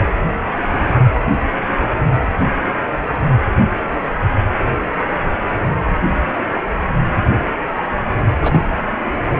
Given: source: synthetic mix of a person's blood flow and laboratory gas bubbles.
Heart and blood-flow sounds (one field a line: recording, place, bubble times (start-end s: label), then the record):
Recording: Doppler ultrasound of blood flow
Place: precordium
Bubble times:
8.41-8.65 s: bubbles
From the record:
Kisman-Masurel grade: 112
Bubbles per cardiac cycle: 1 to 2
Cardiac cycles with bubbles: 1 to 10%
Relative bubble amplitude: moderate (0.250 to 0.450)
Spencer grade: 1 (occasional bubble signal discernible with the cardiac motion signal, with majority of cardiac periods free of bubbles)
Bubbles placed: anywhere in the cardiac cycle